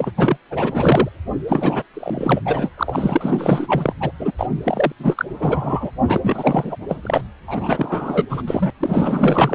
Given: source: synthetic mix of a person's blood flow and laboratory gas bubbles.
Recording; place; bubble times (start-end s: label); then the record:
Doppler ultrasound of blood flow; precordium
0.00-0.12 s: bubbles
0.16-0.37 s: bubbles
0.50-1.09 s: bubbles
1.48-1.82 s: bubbles
1.94-2.42 s: bubbles
2.45-2.69 s: bubbles
2.77-3.93 s: bubbles
4.00-4.12 s: bubbles
4.19-4.31 s: bubbles
4.38-4.47 s: bubbles
4.63-4.92 s: bubbles
4.99-5.25 s: bubbles
5.39-5.91 s: bubbles
6.06-6.76 s: bubbles
6.88-6.99 s: bubbles
7.01-7.21 s: bubbles
7.48-8.27 s: bubbles
8.29-8.43 s: bubbles
8.46-8.71 s: bubbles
8.80-9.55 s: bubbles
From the record:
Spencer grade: 4 (maximum detectable bubble signal sounding continuously throughout systole and diastole of every cardiac period, and overriding the amplitude of the normal cardiac signals); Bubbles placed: anywhere in the cardiac cycle